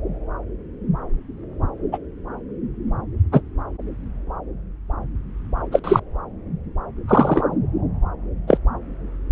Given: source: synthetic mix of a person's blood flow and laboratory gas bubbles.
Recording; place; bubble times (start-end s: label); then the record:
Doppler ultrasound of blood flow; subclavian vein
1.92-1.98 s: bubbles
3.32-3.41 s: bubbles
5.71-5.80 s: bubbles
5.83-6.00 s: bubbles
7.08-7.43 s: bubbles
8.47-8.57 s: bubbles
From the record:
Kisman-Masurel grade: 123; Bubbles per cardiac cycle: 1 to 2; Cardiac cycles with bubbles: 10 to 50%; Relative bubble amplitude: loud (0.450 to 0.775); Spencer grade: 2 (many but less than half of the cardiac periods contain bubble signals, singularly or in groups); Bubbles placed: anywhere in the cardiac cycle